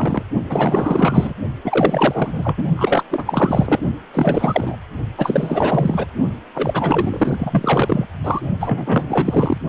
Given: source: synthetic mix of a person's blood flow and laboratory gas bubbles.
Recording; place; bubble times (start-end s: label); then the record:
Doppler ultrasound of blood flow; precordium
0.00-0.23 s: bubbles
0.49-1.34 s: bubbles
1.64-2.67 s: bubbles
2.77-3.03 s: bubbles
3.11-3.24 s: bubbles
3.27-3.81 s: bubbles
4.13-4.76 s: bubbles
5.17-6.06 s: bubbles
6.54-8.06 s: bubbles
8.23-8.40 s: bubbles
8.60-9.58 s: bubbles
From the record:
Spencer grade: 4 (maximum detectable bubble signal sounding continuously throughout systole and diastole of every cardiac period, and overriding the amplitude of the normal cardiac signals); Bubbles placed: only in the low amplitude regions of the cardiac cycle